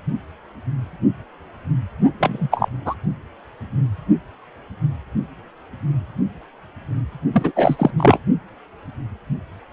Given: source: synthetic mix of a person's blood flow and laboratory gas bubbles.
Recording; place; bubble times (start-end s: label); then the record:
Doppler ultrasound of blood flow; precordium
2.19-2.49 s: bubbles
2.51-2.69 s: bubbles
2.85-2.94 s: bubbles
7.33-7.51 s: bubbles
7.55-7.91 s: bubbles
7.98-8.19 s: bubbles
From the record:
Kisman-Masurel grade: 223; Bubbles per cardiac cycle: several, 3 to 8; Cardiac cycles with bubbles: 10 to 50%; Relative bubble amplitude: loud (0.450 to 0.775); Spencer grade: 2 (many but less than half of the cardiac periods contain bubble signals, singularly or in groups); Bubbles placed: only in the low amplitude regions of the cardiac cycle